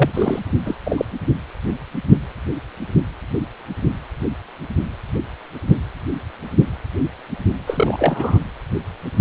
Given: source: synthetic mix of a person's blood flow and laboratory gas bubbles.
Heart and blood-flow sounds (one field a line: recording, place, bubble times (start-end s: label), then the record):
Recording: Doppler ultrasound of blood flow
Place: precordium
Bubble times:
0.00-0.39 s: bubbles
0.65-0.77 s: bubbles
0.85-1.05 s: bubbles
7.67-8.39 s: bubbles
From the record:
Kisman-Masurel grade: 222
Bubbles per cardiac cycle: several, 3 to 8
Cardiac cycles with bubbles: 10 to 50%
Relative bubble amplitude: moderate (0.250 to 0.450)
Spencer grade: 2 (many but less than half of the cardiac periods contain bubble signals, singularly or in groups)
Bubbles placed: anywhere in the cardiac cycle